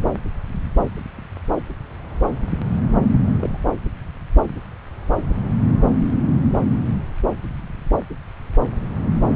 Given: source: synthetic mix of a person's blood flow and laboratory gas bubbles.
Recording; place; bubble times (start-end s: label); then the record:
Doppler ultrasound of blood flow; subclavian vein
3.34-3.73 s: bubbles
From the record:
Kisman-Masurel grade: 111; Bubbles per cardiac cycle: 1 to 2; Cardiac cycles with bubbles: 1 to 10%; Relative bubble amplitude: barely perceptible (0.100 to 0.250); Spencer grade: 1 (occasional bubble signal discernible with the cardiac motion signal, with majority of cardiac periods free of bubbles); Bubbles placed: anywhere in the cardiac cycle